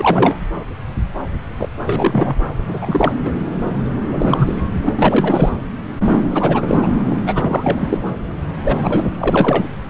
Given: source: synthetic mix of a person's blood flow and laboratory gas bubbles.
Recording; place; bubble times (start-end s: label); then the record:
Doppler ultrasound of blood flow; subclavian vein
0.00-0.41 s: bubbles
1.59-1.69 s: bubbles
1.85-2.35 s: bubbles
2.67-2.79 s: bubbles
2.81-3.14 s: bubbles
3.25-3.37 s: bubbles
4.11-4.61 s: bubbles
4.85-4.93 s: bubbles
4.96-5.50 s: bubbles
6.30-6.88 s: bubbles
7.25-7.98 s: bubbles
8.64-9.07 s: bubbles
9.18-9.68 s: bubbles
From the record:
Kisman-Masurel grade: 333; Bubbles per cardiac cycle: rolling drumbeat, 9 or more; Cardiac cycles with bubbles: 50 to 99%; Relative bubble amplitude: loud (0.450 to 0.775); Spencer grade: 3 (all of the cardiac periods contain showers or single bubble signals, but not dominating or overriding the cardiac motion signals); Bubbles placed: anywhere in the cardiac cycle